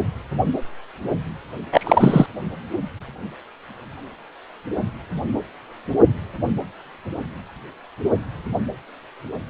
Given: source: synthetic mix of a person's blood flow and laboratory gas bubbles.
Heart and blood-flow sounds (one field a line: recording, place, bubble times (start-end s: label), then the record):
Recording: Doppler ultrasound of blood flow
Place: precordium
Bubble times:
1.72-2.26 s: bubbles
From the record:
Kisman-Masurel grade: 213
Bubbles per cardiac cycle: several, 3 to 8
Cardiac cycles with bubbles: 1 to 10%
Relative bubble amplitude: loud (0.450 to 0.775)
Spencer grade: 1 (occasional bubble signal discernible with the cardiac motion signal, with majority of cardiac periods free of bubbles)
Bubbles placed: anywhere in the cardiac cycle